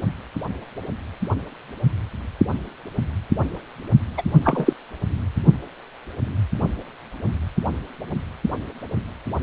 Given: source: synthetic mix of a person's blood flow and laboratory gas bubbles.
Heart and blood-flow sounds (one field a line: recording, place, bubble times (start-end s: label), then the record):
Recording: Doppler ultrasound of blood flow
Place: precordium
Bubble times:
4.17-4.22 s: bubbles
4.44-4.75 s: bubbles
From the record:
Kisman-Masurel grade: 213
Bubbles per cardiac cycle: several, 3 to 8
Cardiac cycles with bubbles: 1 to 10%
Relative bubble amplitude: loud (0.450 to 0.775)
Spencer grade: 1 (occasional bubble signal discernible with the cardiac motion signal, with majority of cardiac periods free of bubbles)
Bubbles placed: only in the low amplitude regions of the cardiac cycle